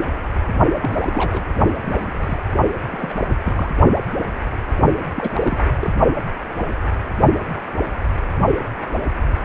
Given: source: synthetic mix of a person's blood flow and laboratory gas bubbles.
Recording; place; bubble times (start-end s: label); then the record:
Doppler ultrasound of blood flow; precordium
0.81-1.43 s: bubbles
1.79-2.38 s: bubbles
2.90-3.13 s: bubbles
3.45-3.70 s: bubbles
5.15-5.64 s: bubbles
5.79-5.90 s: bubbles
From the record:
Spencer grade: 2 (many but less than half of the cardiac periods contain bubble signals, singularly or in groups); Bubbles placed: only in the low amplitude regions of the cardiac cycle